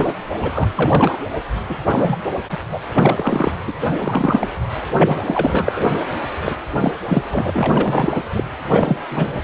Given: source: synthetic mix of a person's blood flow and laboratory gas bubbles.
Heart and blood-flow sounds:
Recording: Doppler ultrasound of blood flow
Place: precordium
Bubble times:
0.00-0.12 s: bubbles
0.34-1.19 s: bubbles
1.69-1.78 s: bubbles
1.86-2.16 s: bubbles
2.51-2.58 s: bubbles
2.69-2.80 s: bubbles
2.94-3.52 s: bubbles
3.67-3.73 s: bubbles
3.97-4.51 s: bubbles
4.96-5.20 s: bubbles
5.25-5.87 s: bubbles
6.45-6.54 s: bubbles
6.81-6.92 s: bubbles
7.08-7.22 s: bubbles
7.30-8.25 s: bubbles
8.34-8.44 s: bubbles
8.62-8.97 s: bubbles
9.11-9.38 s: bubbles
From the record:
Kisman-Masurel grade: 342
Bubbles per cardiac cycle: rolling drumbeat, 9 or more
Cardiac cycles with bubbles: 100%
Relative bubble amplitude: moderate (0.250 to 0.450)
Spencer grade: 3 (all of the cardiac periods contain showers or single bubble signals, but not dominating or overriding the cardiac motion signals)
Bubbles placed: anywhere in the cardiac cycle

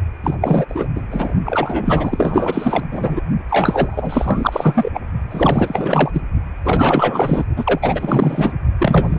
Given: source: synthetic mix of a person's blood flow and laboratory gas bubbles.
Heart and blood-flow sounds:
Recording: Doppler ultrasound of blood flow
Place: precordium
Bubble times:
0.24-0.35 s: bubbles
0.40-0.66 s: bubbles
0.68-0.89 s: bubbles
0.95-1.04 s: bubbles
1.10-1.32 s: bubbles
1.46-2.84 s: bubbles
2.92-3.21 s: bubbles
3.48-4.90 s: bubbles
4.94-5.00 s: bubbles
5.31-6.22 s: bubbles
6.65-7.45 s: bubbles
7.56-7.79 s: bubbles
7.82-8.52 s: bubbles
8.79-9.19 s: bubbles
From the record:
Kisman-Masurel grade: 444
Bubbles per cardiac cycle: continuous sound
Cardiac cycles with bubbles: 100%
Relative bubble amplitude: maximal (0.775 to 0.999)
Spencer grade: 4 (maximum detectable bubble signal sounding continuously throughout systole and diastole of every cardiac period, and overriding the amplitude of the normal cardiac signals)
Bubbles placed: only in the low amplitude regions of the cardiac cycle

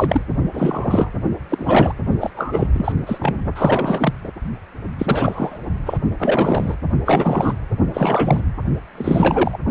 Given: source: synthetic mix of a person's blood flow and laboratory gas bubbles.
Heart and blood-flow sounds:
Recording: Doppler ultrasound of blood flow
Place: precordium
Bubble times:
0.00-0.21 s: bubbles
0.53-1.11 s: bubbles
1.50-1.95 s: bubbles
2.20-2.30 s: bubbles
2.36-2.67 s: bubbles
2.73-2.92 s: bubbles
3.06-3.35 s: bubbles
3.55-4.13 s: bubbles
4.24-4.29 s: bubbles
4.98-5.58 s: bubbles
5.85-5.98 s: bubbles
6.18-6.75 s: bubbles
7.05-7.54 s: bubbles
7.93-8.42 s: bubbles
8.95-9.58 s: bubbles
From the record:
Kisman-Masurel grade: 343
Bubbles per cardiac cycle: rolling drumbeat, 9 or more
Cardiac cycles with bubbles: 100%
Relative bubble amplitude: loud (0.450 to 0.775)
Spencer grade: 3 (all of the cardiac periods contain showers or single bubble signals, but not dominating or overriding the cardiac motion signals)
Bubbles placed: only in the low amplitude regions of the cardiac cycle

